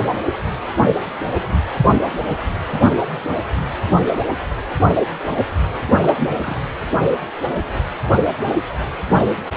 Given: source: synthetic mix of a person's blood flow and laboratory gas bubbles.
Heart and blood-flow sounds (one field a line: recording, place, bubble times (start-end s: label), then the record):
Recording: Doppler ultrasound of blood flow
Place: precordium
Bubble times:
5.98-6.16 s: bubbles
6.20-6.29 s: bubbles
6.37-6.61 s: bubbles
From the record:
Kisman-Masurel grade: 221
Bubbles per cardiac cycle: several, 3 to 8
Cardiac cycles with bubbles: 10 to 50%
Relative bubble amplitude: barely perceptible (0.100 to 0.250)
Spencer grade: 2 (many but less than half of the cardiac periods contain bubble signals, singularly or in groups)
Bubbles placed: anywhere in the cardiac cycle